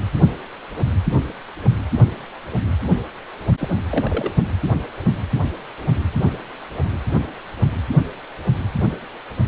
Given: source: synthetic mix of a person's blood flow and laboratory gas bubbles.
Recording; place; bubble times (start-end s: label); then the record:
Doppler ultrasound of blood flow; precordium
3.58-3.77 s: bubbles
3.89-4.31 s: bubbles
From the record:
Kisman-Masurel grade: 112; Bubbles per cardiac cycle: 1 to 2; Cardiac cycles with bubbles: 1 to 10%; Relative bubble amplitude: moderate (0.250 to 0.450); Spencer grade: 1 (occasional bubble signal discernible with the cardiac motion signal, with majority of cardiac periods free of bubbles); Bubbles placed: only in the low amplitude regions of the cardiac cycle